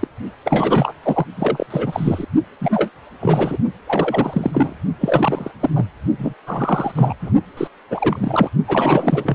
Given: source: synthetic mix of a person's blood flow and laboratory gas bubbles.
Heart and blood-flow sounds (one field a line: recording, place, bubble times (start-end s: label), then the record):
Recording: Doppler ultrasound of blood flow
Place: precordium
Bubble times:
0.00-0.08 s: bubbles
0.45-0.94 s: bubbles
1.03-1.26 s: bubbles
1.36-1.66 s: bubbles
1.70-2.26 s: bubbles
2.60-2.90 s: bubbles
3.20-3.57 s: bubbles
3.87-4.74 s: bubbles
5.00-5.51 s: bubbles
5.59-5.70 s: bubbles
5.75-5.85 s: bubbles
6.18-6.34 s: bubbles
6.46-6.92 s: bubbles
6.95-7.14 s: bubbles
7.22-7.31 s: bubbles
7.57-7.67 s: bubbles
7.91-8.49 s: bubbles
8.68-9.35 s: bubbles
From the record:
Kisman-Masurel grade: 343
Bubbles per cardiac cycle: rolling drumbeat, 9 or more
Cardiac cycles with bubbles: 100%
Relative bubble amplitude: loud (0.450 to 0.775)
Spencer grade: 3 (all of the cardiac periods contain showers or single bubble signals, but not dominating or overriding the cardiac motion signals)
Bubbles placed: only in the low amplitude regions of the cardiac cycle